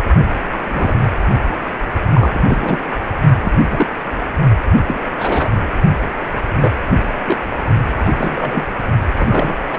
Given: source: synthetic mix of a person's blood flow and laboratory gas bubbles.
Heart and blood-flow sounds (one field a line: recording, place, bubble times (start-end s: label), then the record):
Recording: Doppler ultrasound of blood flow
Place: precordium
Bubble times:
0.52-0.57 s: bubbles
0.68-0.93 s: bubbles
1.46-1.54 s: bubbles
2.14-2.79 s: bubbles
3.42-3.52 s: bubbles
3.69-3.86 s: bubbles
4.87-5.00 s: bubbles
5.18-5.49 s: bubbles
6.55-6.72 s: bubbles
7.25-7.40 s: bubbles
7.99-8.67 s: bubbles
9.16-9.53 s: bubbles
9.71-9.78 s: bubbles
From the record:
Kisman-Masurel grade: 242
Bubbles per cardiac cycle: several, 3 to 8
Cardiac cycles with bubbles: 100%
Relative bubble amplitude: moderate (0.250 to 0.450)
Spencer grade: 3 (all of the cardiac periods contain showers or single bubble signals, but not dominating or overriding the cardiac motion signals)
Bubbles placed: only in the low amplitude regions of the cardiac cycle